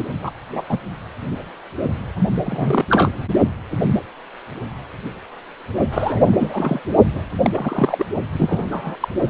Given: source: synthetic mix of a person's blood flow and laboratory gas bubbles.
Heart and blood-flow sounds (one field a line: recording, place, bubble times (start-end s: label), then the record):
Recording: Doppler ultrasound of blood flow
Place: precordium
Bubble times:
0.00-0.04 s: bubbles
0.22-0.31 s: bubbles
0.54-0.62 s: bubbles
0.69-0.79 s: bubbles
2.44-2.85 s: bubbles
2.90-3.12 s: bubbles
5.91-6.80 s: bubbles
7.15-7.22 s: bubbles
7.42-7.50 s: bubbles
7.54-8.06 s: bubbles
8.32-8.68 s: bubbles
8.71-8.96 s: bubbles
9.00-9.08 s: bubbles
From the record:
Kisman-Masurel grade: 232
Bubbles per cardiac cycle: several, 3 to 8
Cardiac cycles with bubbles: 50 to 99%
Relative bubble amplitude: moderate (0.250 to 0.450)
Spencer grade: 3 (all of the cardiac periods contain showers or single bubble signals, but not dominating or overriding the cardiac motion signals)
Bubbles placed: only in the low amplitude regions of the cardiac cycle